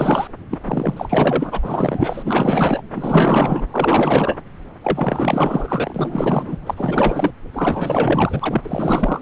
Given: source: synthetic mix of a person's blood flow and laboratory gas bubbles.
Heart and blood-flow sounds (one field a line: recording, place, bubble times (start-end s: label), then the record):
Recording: Doppler ultrasound of blood flow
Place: subclavian vein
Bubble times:
0.00-0.28 s: bubbles
0.50-0.59 s: bubbles
0.65-2.82 s: bubbles
2.95-3.65 s: bubbles
3.71-4.39 s: bubbles
4.83-6.57 s: bubbles
6.66-7.31 s: bubbles
7.53-9.22 s: bubbles
From the record:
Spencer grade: 4 (maximum detectable bubble signal sounding continuously throughout systole and diastole of every cardiac period, and overriding the amplitude of the normal cardiac signals)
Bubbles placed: anywhere in the cardiac cycle